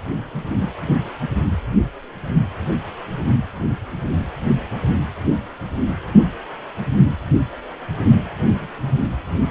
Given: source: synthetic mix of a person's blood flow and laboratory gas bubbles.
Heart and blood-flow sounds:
Doppler ultrasound of blood flow; precordium
no bubbles
From the record:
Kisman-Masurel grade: 000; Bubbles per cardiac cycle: 0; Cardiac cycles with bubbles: 0%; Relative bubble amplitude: no bubbles discernible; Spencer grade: 0 (complete lack of bubble signals)

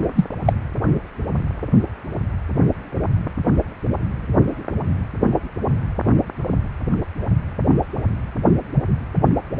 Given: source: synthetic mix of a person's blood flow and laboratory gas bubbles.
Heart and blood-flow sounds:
Doppler ultrasound of blood flow; precordium
0.15-0.26 s: bubbles
0.45-0.53 s: bubbles
From the record:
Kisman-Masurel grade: 123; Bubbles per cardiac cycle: 1 to 2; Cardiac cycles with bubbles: 10 to 50%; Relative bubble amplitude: loud (0.450 to 0.775); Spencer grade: 2 (many but less than half of the cardiac periods contain bubble signals, singularly or in groups); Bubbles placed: anywhere in the cardiac cycle

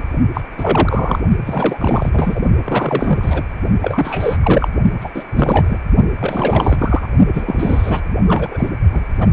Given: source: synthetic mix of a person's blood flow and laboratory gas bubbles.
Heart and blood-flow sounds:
Doppler ultrasound of blood flow; precordium
0.00-0.02 s: bubbles
0.34-0.41 s: bubbles
0.57-1.20 s: bubbles
1.45-2.41 s: bubbles
2.64-3.43 s: bubbles
3.82-4.38 s: bubbles
4.42-4.69 s: bubbles
5.00-5.09 s: bubbles
5.14-5.24 s: bubbles
5.34-5.79 s: bubbles
6.21-7.08 s: bubbles
7.33-8.05 s: bubbles
8.27-8.71 s: bubbles
8.92-9.04 s: bubbles
9.20-9.28 s: bubbles
From the record:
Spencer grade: 3 (all of the cardiac periods contain showers or single bubble signals, but not dominating or overriding the cardiac motion signals); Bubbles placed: only in the low amplitude regions of the cardiac cycle

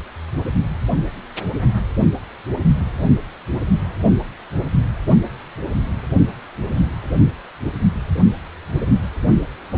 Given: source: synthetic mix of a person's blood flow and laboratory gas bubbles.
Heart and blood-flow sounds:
Doppler ultrasound of blood flow; precordium
9.72-9.78 s: bubbles
From the record:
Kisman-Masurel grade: 112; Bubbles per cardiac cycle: 1 to 2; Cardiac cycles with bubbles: 1 to 10%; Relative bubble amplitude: moderate (0.250 to 0.450); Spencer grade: 1 (occasional bubble signal discernible with the cardiac motion signal, with majority of cardiac periods free of bubbles); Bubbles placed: only in the low amplitude regions of the cardiac cycle

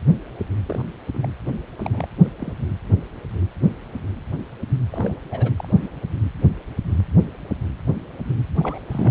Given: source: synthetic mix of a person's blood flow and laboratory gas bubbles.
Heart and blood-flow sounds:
Doppler ultrasound of blood flow; precordium
0.65-0.85 s: bubbles
1.13-1.18 s: bubbles
1.22-1.27 s: bubbles
1.79-2.10 s: bubbles
2.18-2.28 s: bubbles
2.38-2.52 s: bubbles
4.91-5.17 s: bubbles
5.31-5.52 s: bubbles
5.58-5.68 s: bubbles
5.73-5.88 s: bubbles
8.59-8.80 s: bubbles
8.88-9.11 s: bubbles
From the record:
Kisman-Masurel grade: 221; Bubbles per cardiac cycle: several, 3 to 8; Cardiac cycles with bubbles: 10 to 50%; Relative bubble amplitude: barely perceptible (0.100 to 0.250); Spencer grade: 2 (many but less than half of the cardiac periods contain bubble signals, singularly or in groups); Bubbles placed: anywhere in the cardiac cycle

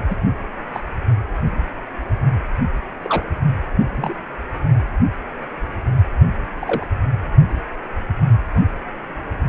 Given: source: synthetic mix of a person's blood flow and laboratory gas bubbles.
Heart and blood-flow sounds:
Doppler ultrasound of blood flow; precordium
0.10-0.15 s: bubbles
0.73-0.80 s: bubbles
3.02-3.24 s: bubbles
3.96-4.14 s: bubbles
6.60-6.88 s: bubbles
From the record:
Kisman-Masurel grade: 122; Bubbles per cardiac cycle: 1 to 2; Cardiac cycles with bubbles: 10 to 50%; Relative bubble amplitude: moderate (0.250 to 0.450); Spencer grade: 2 (many but less than half of the cardiac periods contain bubble signals, singularly or in groups); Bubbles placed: only in the low amplitude regions of the cardiac cycle

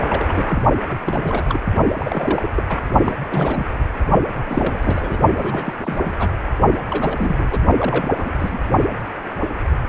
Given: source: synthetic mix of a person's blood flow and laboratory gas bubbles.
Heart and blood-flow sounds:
Doppler ultrasound of blood flow; precordium
0.10-0.62 s: bubbles
0.91-0.95 s: bubbles
1.03-1.43 s: bubbles
1.49-1.59 s: bubbles
1.96-2.50 s: bubbles
2.56-2.64 s: bubbles
2.69-2.77 s: bubbles
3.05-3.15 s: bubbles
3.30-3.65 s: bubbles
4.45-5.21 s: bubbles
5.38-5.73 s: bubbles
5.84-6.01 s: bubbles
6.04-6.12 s: bubbles
6.18-6.30 s: bubbles
6.89-7.46 s: bubbles
7.50-7.61 s: bubbles
7.79-8.07 s: bubbles
8.17-8.59 s: bubbles
From the record:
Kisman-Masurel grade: 332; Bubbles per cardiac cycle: rolling drumbeat, 9 or more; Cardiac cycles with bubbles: 50 to 99%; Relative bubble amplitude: moderate (0.250 to 0.450); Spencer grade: 3 (all of the cardiac periods contain showers or single bubble signals, but not dominating or overriding the cardiac motion signals); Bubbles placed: only in the low amplitude regions of the cardiac cycle

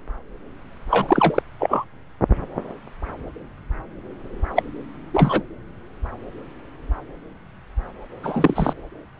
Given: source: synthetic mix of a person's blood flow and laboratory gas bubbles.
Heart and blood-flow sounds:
Doppler ultrasound of blood flow; subclavian vein
0.90-1.42 s: bubbles
1.59-1.84 s: bubbles
4.55-4.63 s: bubbles
5.13-5.42 s: bubbles
8.23-8.73 s: bubbles
From the record:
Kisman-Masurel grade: 223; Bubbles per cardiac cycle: several, 3 to 8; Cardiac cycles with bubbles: 10 to 50%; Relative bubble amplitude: loud (0.450 to 0.775); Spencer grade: 2 (many but less than half of the cardiac periods contain bubble signals, singularly or in groups); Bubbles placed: anywhere in the cardiac cycle

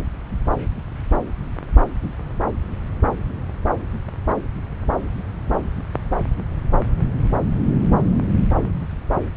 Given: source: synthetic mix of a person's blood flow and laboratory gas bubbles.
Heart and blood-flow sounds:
Doppler ultrasound of blood flow; subclavian vein
no bubbles
From the record:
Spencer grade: 0 (complete lack of bubble signals)

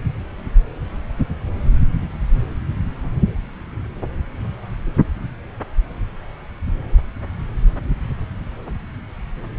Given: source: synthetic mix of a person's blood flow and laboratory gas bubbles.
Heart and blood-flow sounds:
Doppler ultrasound of blood flow; subclavian vein
no bubbles
From the record:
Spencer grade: 0 (complete lack of bubble signals)

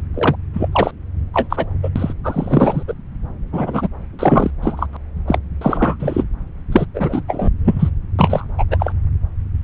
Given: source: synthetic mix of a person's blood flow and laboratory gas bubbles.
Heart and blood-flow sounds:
Doppler ultrasound of blood flow; subclavian vein
0.14-0.35 s: bubbles
0.53-0.68 s: bubbles
0.72-0.91 s: bubbles
1.33-1.47 s: bubbles
1.49-1.66 s: bubbles
1.83-1.89 s: bubbles
1.96-2.13 s: bubbles
2.23-2.83 s: bubbles
2.88-2.94 s: bubbles
3.52-3.88 s: bubbles
4.19-4.51 s: bubbles
4.62-4.88 s: bubbles
4.93-4.97 s: bubbles
5.27-5.38 s: bubbles
5.61-5.96 s: bubbles
6.00-6.24 s: bubbles
6.72-6.86 s: bubbles
6.94-7.22 s: bubbles
7.28-7.50 s: bubbles
7.65-7.91 s: bubbles
8.19-8.45 s: bubbles
8.58-8.64 s: bubbles
8.71-8.93 s: bubbles
From the record:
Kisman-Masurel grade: 333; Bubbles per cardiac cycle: rolling drumbeat, 9 or more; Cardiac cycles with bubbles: 50 to 99%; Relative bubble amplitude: loud (0.450 to 0.775); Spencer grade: 3 (all of the cardiac periods contain showers or single bubble signals, but not dominating or overriding the cardiac motion signals); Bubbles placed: anywhere in the cardiac cycle

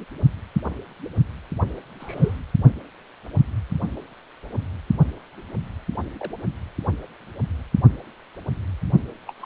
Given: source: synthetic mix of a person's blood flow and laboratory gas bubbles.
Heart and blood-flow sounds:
Doppler ultrasound of blood flow; precordium
2.00-2.36 s: bubbles
6.19-6.31 s: bubbles
9.28-9.33 s: bubbles
9.41-9.46 s: bubbles
From the record:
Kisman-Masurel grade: 121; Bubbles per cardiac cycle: 1 to 2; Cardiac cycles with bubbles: 10 to 50%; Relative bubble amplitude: barely perceptible (0.100 to 0.250); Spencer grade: 2 (many but less than half of the cardiac periods contain bubble signals, singularly or in groups); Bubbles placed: only in the low amplitude regions of the cardiac cycle

